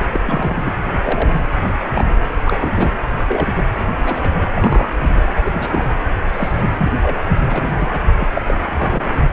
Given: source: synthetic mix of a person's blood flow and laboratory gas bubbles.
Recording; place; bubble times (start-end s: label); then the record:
Doppler ultrasound of blood flow; precordium
0.00-0.06 s: bubbles
0.12-0.20 s: bubbles
0.26-0.74 s: bubbles
0.93-1.33 s: bubbles
1.61-1.73 s: bubbles
1.89-2.09 s: bubbles
2.44-2.92 s: bubbles
3.27-3.62 s: bubbles
4.05-4.46 s: bubbles
4.55-4.89 s: bubbles
5.08-5.22 s: bubbles
5.45-5.89 s: bubbles
6.28-6.62 s: bubbles
6.78-6.91 s: bubbles
7.01-7.24 s: bubbles
7.39-7.88 s: bubbles
7.92-8.00 s: bubbles
8.19-8.27 s: bubbles
8.33-8.42 s: bubbles
8.47-8.54 s: bubbles
8.67-9.08 s: bubbles
9.12-9.32 s: bubbles
From the record:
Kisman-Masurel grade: 242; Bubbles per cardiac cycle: several, 3 to 8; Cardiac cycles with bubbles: 100%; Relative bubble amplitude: moderate (0.250 to 0.450); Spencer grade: 3 (all of the cardiac periods contain showers or single bubble signals, but not dominating or overriding the cardiac motion signals); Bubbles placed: anywhere in the cardiac cycle